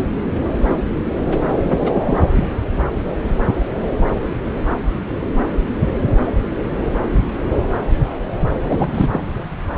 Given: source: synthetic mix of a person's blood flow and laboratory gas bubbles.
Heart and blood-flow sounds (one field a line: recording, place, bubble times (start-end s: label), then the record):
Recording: Doppler ultrasound of blood flow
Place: subclavian vein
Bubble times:
1.63-2.24 s: bubbles
2.35-2.45 s: bubbles
8.63-9.10 s: bubbles
9.12-9.25 s: bubbles
From the record:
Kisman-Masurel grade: 222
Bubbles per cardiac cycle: several, 3 to 8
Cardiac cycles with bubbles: 10 to 50%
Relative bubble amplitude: moderate (0.250 to 0.450)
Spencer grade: 2 (many but less than half of the cardiac periods contain bubble signals, singularly or in groups)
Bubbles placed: anywhere in the cardiac cycle